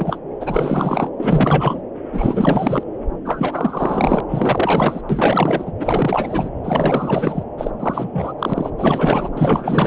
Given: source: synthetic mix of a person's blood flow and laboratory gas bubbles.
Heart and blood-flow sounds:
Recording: Doppler ultrasound of blood flow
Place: subclavian vein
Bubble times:
0.00-0.20 s: bubbles
0.41-1.10 s: bubbles
1.17-1.82 s: bubbles
2.12-2.83 s: bubbles
3.25-4.21 s: bubbles
4.29-5.01 s: bubbles
5.09-5.72 s: bubbles
5.79-6.50 s: bubbles
6.63-7.43 s: bubbles
7.58-7.71 s: bubbles
7.79-8.32 s: bubbles
8.39-8.71 s: bubbles
8.78-9.29 s: bubbles
9.35-9.87 s: bubbles
From the record:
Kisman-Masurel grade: 444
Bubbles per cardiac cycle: continuous sound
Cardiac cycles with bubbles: 100%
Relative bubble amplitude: maximal (0.775 to 0.999)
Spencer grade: 4 (maximum detectable bubble signal sounding continuously throughout systole and diastole of every cardiac period, and overriding the amplitude of the normal cardiac signals)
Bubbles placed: anywhere in the cardiac cycle

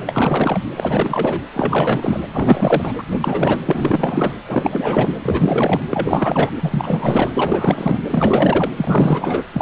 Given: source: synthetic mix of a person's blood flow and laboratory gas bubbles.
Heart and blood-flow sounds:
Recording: Doppler ultrasound of blood flow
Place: precordium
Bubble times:
0.06-0.59 s: bubbles
0.76-1.43 s: bubbles
1.53-2.20 s: bubbles
2.32-2.94 s: bubbles
2.98-3.03 s: bubbles
3.10-3.61 s: bubbles
3.65-4.33 s: bubbles
4.47-5.22 s: bubbles
5.25-5.83 s: bubbles
5.91-6.51 s: bubbles
6.60-7.31 s: bubbles
7.33-8.00 s: bubbles
8.08-8.71 s: bubbles
8.77-9.43 s: bubbles
9.53-9.62 s: bubbles
From the record:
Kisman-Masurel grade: 444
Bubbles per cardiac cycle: continuous sound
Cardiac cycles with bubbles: 100%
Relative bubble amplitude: maximal (0.775 to 0.999)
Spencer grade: 4 (maximum detectable bubble signal sounding continuously throughout systole and diastole of every cardiac period, and overriding the amplitude of the normal cardiac signals)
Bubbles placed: anywhere in the cardiac cycle

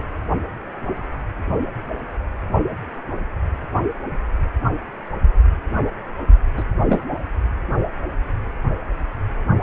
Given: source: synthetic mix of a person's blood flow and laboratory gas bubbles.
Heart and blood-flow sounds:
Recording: Doppler ultrasound of blood flow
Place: precordium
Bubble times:
6.56-6.63 s: bubbles
6.89-7.03 s: bubbles
From the record:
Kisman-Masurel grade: 113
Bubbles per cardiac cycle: 1 to 2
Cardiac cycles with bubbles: 1 to 10%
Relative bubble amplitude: loud (0.450 to 0.775)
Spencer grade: 1 (occasional bubble signal discernible with the cardiac motion signal, with majority of cardiac periods free of bubbles)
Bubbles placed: only in the low amplitude regions of the cardiac cycle

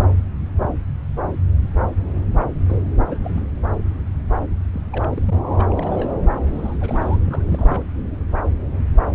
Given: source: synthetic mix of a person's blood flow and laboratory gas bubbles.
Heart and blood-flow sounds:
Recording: Doppler ultrasound of blood flow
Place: subclavian vein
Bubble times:
2.69-2.76 s: bubbles
3.04-3.40 s: bubbles
4.73-4.82 s: bubbles
4.91-5.07 s: bubbles
5.10-5.35 s: bubbles
5.53-6.09 s: bubbles
6.53-6.77 s: bubbles
6.80-7.17 s: bubbles
7.25-7.84 s: bubbles
From the record:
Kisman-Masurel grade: 221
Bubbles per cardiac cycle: several, 3 to 8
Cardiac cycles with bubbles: 10 to 50%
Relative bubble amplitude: barely perceptible (0.100 to 0.250)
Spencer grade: 2 (many but less than half of the cardiac periods contain bubble signals, singularly or in groups)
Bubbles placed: anywhere in the cardiac cycle

